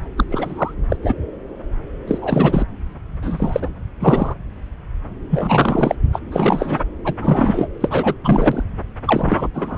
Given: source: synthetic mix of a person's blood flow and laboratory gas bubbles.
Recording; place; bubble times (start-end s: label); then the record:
Doppler ultrasound of blood flow; subclavian vein
0.17-0.24 s: bubbles
0.30-0.74 s: bubbles
0.89-0.96 s: bubbles
1.02-1.15 s: bubbles
2.07-2.67 s: bubbles
3.22-3.73 s: bubbles
4.00-4.35 s: bubbles
5.30-5.95 s: bubbles
6.12-6.20 s: bubbles
6.32-6.80 s: bubbles
7.04-7.14 s: bubbles
7.18-7.68 s: bubbles
7.81-8.15 s: bubbles
8.24-8.64 s: bubbles
9.05-9.47 s: bubbles
9.54-9.78 s: bubbles
From the record:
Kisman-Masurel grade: 333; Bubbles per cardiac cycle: rolling drumbeat, 9 or more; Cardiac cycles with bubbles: 50 to 99%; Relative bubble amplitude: loud (0.450 to 0.775); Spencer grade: 3 (all of the cardiac periods contain showers or single bubble signals, but not dominating or overriding the cardiac motion signals); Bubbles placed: anywhere in the cardiac cycle